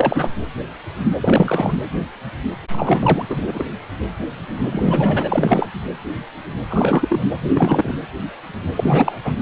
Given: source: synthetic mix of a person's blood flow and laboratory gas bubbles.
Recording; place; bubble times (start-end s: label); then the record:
Doppler ultrasound of blood flow; precordium
0.00-0.31 s: bubbles
1.21-1.73 s: bubbles
2.70-3.26 s: bubbles
3.29-3.65 s: bubbles
4.62-5.67 s: bubbles
6.68-7.29 s: bubbles
7.50-7.94 s: bubbles
8.75-9.18 s: bubbles
9.24-9.36 s: bubbles
From the record:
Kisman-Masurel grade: 333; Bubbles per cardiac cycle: rolling drumbeat, 9 or more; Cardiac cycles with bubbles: 50 to 99%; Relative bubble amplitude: loud (0.450 to 0.775); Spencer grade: 3 (all of the cardiac periods contain showers or single bubble signals, but not dominating or overriding the cardiac motion signals); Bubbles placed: anywhere in the cardiac cycle